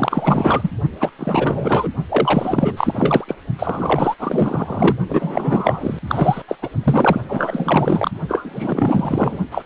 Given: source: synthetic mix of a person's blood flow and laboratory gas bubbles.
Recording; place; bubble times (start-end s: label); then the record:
Doppler ultrasound of blood flow; precordium
0.00-0.71 s: bubbles
1.00-1.10 s: bubbles
1.19-1.89 s: bubbles
2.08-3.25 s: bubbles
3.27-3.36 s: bubbles
3.58-4.14 s: bubbles
4.19-4.96 s: bubbles
5.09-5.99 s: bubbles
6.08-6.42 s: bubbles
6.48-6.55 s: bubbles
6.62-6.70 s: bubbles
6.83-7.21 s: bubbles
7.29-8.11 s: bubbles
8.28-9.39 s: bubbles
9.51-9.63 s: bubbles
From the record:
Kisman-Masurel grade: 444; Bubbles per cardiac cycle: continuous sound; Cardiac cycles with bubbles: 100%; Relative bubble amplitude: maximal (0.775 to 0.999); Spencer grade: 4 (maximum detectable bubble signal sounding continuously throughout systole and diastole of every cardiac period, and overriding the amplitude of the normal cardiac signals); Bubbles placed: only in the low amplitude regions of the cardiac cycle